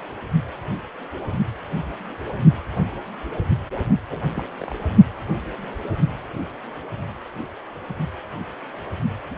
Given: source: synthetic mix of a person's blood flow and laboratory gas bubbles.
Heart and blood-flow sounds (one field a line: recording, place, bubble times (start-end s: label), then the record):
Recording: Doppler ultrasound of blood flow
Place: precordium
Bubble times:
4.08-4.25 s: bubbles
4.36-4.43 s: bubbles
4.61-4.74 s: bubbles
9.30-9.36 s: bubbles
From the record:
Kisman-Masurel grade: 221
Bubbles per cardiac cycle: several, 3 to 8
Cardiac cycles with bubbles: 10 to 50%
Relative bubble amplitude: barely perceptible (0.100 to 0.250)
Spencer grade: 2 (many but less than half of the cardiac periods contain bubble signals, singularly or in groups)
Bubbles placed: only in the low amplitude regions of the cardiac cycle